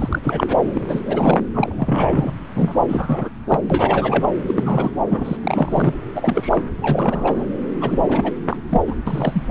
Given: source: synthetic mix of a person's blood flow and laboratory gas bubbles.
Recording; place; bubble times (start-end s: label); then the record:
Doppler ultrasound of blood flow; subclavian vein
0.00-0.19 s: bubbles
0.23-0.56 s: bubbles
0.74-0.82 s: bubbles
0.88-1.00 s: bubbles
1.04-1.40 s: bubbles
1.54-2.33 s: bubbles
2.55-2.82 s: bubbles
2.88-3.29 s: bubbles
3.49-4.27 s: bubbles
4.47-4.91 s: bubbles
5.09-5.37 s: bubbles
5.42-5.94 s: bubbles
6.15-6.62 s: bubbles
6.81-7.44 s: bubbles
7.81-8.33 s: bubbles
8.49-8.57 s: bubbles
8.69-8.82 s: bubbles
8.87-8.96 s: bubbles
9.07-9.46 s: bubbles
From the record:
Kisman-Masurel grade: 342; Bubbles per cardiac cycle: rolling drumbeat, 9 or more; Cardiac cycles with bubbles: 100%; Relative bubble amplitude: moderate (0.250 to 0.450); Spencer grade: 3 (all of the cardiac periods contain showers or single bubble signals, but not dominating or overriding the cardiac motion signals); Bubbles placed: anywhere in the cardiac cycle